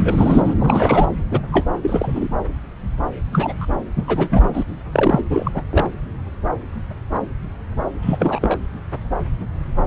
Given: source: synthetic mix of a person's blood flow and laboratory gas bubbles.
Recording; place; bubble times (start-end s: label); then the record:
Doppler ultrasound of blood flow; subclavian vein
0.00-0.42 s: bubbles
0.45-0.54 s: bubbles
0.58-1.09 s: bubbles
1.30-1.41 s: bubbles
1.51-1.66 s: bubbles
1.82-2.29 s: bubbles
3.32-3.66 s: bubbles
3.96-4.04 s: bubbles
4.07-4.65 s: bubbles
4.92-5.62 s: bubbles
5.71-5.88 s: bubbles
8.02-8.56 s: bubbles
From the record:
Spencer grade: 2 (many but less than half of the cardiac periods contain bubble signals, singularly or in groups); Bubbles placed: anywhere in the cardiac cycle